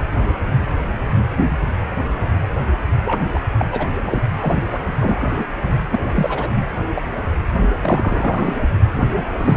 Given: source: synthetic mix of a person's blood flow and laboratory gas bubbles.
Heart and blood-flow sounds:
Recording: Doppler ultrasound of blood flow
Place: precordium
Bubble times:
3.05-3.25 s: bubbles
3.34-3.41 s: bubbles
3.58-3.67 s: bubbles
3.71-3.88 s: bubbles
4.04-4.22 s: bubbles
4.40-4.81 s: bubbles
5.00-5.45 s: bubbles
5.90-6.12 s: bubbles
6.15-6.67 s: bubbles
6.95-7.06 s: bubbles
7.81-8.54 s: bubbles
8.96-9.23 s: bubbles
9.38-9.57 s: bubbles
From the record:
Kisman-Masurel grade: 232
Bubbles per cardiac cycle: several, 3 to 8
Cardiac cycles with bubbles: 50 to 99%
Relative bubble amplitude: moderate (0.250 to 0.450)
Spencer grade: 3 (all of the cardiac periods contain showers or single bubble signals, but not dominating or overriding the cardiac motion signals)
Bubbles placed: only in the low amplitude regions of the cardiac cycle

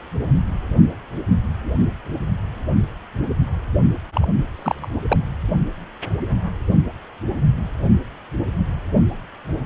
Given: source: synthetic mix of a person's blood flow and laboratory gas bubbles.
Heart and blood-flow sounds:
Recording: Doppler ultrasound of blood flow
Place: precordium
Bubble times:
4.13-4.35 s: bubbles
4.55-4.89 s: bubbles
5.09-5.19 s: bubbles
From the record:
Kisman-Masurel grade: 222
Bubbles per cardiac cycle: several, 3 to 8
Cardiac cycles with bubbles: 10 to 50%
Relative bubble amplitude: moderate (0.250 to 0.450)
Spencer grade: 2 (many but less than half of the cardiac periods contain bubble signals, singularly or in groups)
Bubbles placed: only in the low amplitude regions of the cardiac cycle

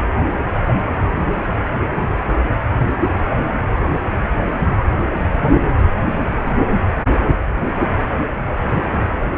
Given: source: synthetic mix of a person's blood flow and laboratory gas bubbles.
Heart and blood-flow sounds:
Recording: Doppler ultrasound of blood flow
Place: precordium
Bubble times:
no bubbles
From the record:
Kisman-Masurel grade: 000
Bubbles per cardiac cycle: 0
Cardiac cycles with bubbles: 0%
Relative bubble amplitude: no bubbles discernible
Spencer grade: 0 (complete lack of bubble signals)

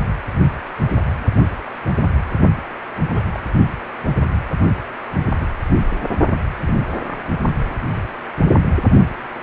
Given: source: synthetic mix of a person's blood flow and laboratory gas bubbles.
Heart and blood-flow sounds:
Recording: Doppler ultrasound of blood flow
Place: precordium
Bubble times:
3.13-3.25 s: bubbles
3.33-3.39 s: bubbles
5.40-5.46 s: bubbles
6.66-6.74 s: bubbles
7.04-7.17 s: bubbles
From the record:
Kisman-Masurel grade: 121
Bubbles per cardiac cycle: 1 to 2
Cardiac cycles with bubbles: 10 to 50%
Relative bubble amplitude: barely perceptible (0.100 to 0.250)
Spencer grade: 2 (many but less than half of the cardiac periods contain bubble signals, singularly or in groups)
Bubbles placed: only in the low amplitude regions of the cardiac cycle

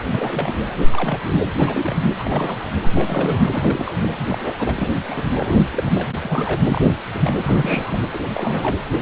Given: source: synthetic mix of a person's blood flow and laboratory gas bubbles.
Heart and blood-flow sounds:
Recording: Doppler ultrasound of blood flow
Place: precordium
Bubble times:
0.07-0.69 s: bubbles
0.90-1.19 s: bubbles
1.27-1.39 s: bubbles
1.58-1.96 s: bubbles
2.19-2.60 s: bubbles
2.81-3.51 s: bubbles
3.54-4.08 s: bubbles
4.27-4.53 s: bubbles
4.58-4.93 s: bubbles
5.08-5.22 s: bubbles
5.25-5.63 s: bubbles
5.70-5.84 s: bubbles
5.94-6.10 s: bubbles
6.23-6.95 s: bubbles
7.09-7.31 s: bubbles
7.42-8.03 s: bubbles
8.12-8.20 s: bubbles
8.33-8.79 s: bubbles
From the record:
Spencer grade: 3 (all of the cardiac periods contain showers or single bubble signals, but not dominating or overriding the cardiac motion signals)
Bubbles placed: anywhere in the cardiac cycle

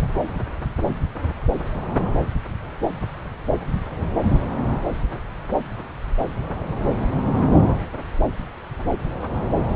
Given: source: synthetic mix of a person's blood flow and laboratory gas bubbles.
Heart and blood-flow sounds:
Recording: Doppler ultrasound of blood flow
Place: subclavian vein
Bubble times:
0.00-0.22 s: bubbles
From the record:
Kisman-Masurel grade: 112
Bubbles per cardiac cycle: 1 to 2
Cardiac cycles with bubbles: 1 to 10%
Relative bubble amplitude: moderate (0.250 to 0.450)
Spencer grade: 1 (occasional bubble signal discernible with the cardiac motion signal, with majority of cardiac periods free of bubbles)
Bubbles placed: anywhere in the cardiac cycle

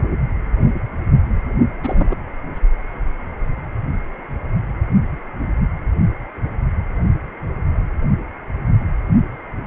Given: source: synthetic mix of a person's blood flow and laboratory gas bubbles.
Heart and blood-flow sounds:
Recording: Doppler ultrasound of blood flow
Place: precordium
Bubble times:
1.83-2.16 s: bubbles
From the record:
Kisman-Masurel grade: 112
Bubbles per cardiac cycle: 1 to 2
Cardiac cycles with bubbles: 1 to 10%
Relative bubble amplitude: moderate (0.250 to 0.450)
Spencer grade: 1 (occasional bubble signal discernible with the cardiac motion signal, with majority of cardiac periods free of bubbles)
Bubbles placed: only in the low amplitude regions of the cardiac cycle

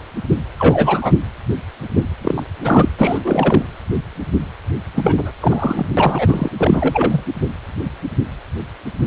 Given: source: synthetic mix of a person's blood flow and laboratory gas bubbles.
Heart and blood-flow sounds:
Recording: Doppler ultrasound of blood flow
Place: precordium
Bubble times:
0.57-1.14 s: bubbles
2.23-2.42 s: bubbles
2.64-2.89 s: bubbles
2.98-3.19 s: bubbles
3.25-3.63 s: bubbles
4.95-5.31 s: bubbles
5.40-5.86 s: bubbles
5.97-6.52 s: bubbles
6.57-7.23 s: bubbles
From the record:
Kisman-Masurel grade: 333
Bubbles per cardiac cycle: rolling drumbeat, 9 or more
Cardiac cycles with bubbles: 50 to 99%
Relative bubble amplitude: loud (0.450 to 0.775)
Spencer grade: 3 (all of the cardiac periods contain showers or single bubble signals, but not dominating or overriding the cardiac motion signals)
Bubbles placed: anywhere in the cardiac cycle

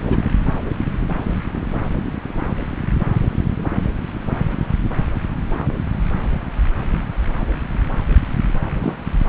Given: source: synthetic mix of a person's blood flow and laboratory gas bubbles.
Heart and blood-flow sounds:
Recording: Doppler ultrasound of blood flow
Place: subclavian vein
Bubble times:
0.03-0.28 s: bubbles
8.82-8.96 s: bubbles
From the record:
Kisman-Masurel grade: 122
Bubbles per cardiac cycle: 1 to 2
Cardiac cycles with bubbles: 10 to 50%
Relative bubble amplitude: moderate (0.250 to 0.450)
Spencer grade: 2 (many but less than half of the cardiac periods contain bubble signals, singularly or in groups)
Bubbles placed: anywhere in the cardiac cycle

